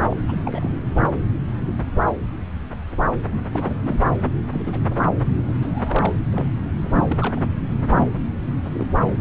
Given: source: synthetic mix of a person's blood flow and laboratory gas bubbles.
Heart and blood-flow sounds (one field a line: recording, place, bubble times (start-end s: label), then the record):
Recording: Doppler ultrasound of blood flow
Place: subclavian vein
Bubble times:
0.10-0.16 s: bubbles
0.28-0.70 s: bubbles
3.52-4.00 s: bubbles
4.52-4.95 s: bubbles
5.43-5.54 s: bubbles
5.62-6.13 s: bubbles
6.31-6.53 s: bubbles
6.72-7.40 s: bubbles
7.81-8.06 s: bubbles
8.73-8.87 s: bubbles
From the record:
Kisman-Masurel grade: 232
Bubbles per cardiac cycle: several, 3 to 8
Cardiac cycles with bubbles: 50 to 99%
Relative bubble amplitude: moderate (0.250 to 0.450)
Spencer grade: 3 (all of the cardiac periods contain showers or single bubble signals, but not dominating or overriding the cardiac motion signals)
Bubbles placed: anywhere in the cardiac cycle